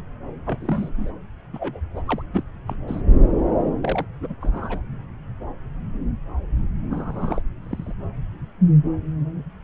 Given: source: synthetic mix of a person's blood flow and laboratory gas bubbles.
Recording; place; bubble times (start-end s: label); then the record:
Doppler ultrasound of blood flow; subclavian vein
0.46-0.58 s: bubbles
0.60-1.11 s: bubbles
1.53-1.80 s: bubbles
1.95-2.01 s: bubbles
2.07-2.22 s: bubbles
2.32-2.43 s: bubbles
2.67-2.75 s: bubbles
2.88-3.02 s: bubbles
3.58-3.70 s: bubbles
3.81-4.05 s: bubbles
4.21-4.34 s: bubbles
4.41-4.81 s: bubbles
6.91-7.41 s: bubbles
7.62-7.93 s: bubbles
From the record:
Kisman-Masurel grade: 221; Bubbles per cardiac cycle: several, 3 to 8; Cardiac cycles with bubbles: 10 to 50%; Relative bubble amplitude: barely perceptible (0.100 to 0.250); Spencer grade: 2 (many but less than half of the cardiac periods contain bubble signals, singularly or in groups); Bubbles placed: anywhere in the cardiac cycle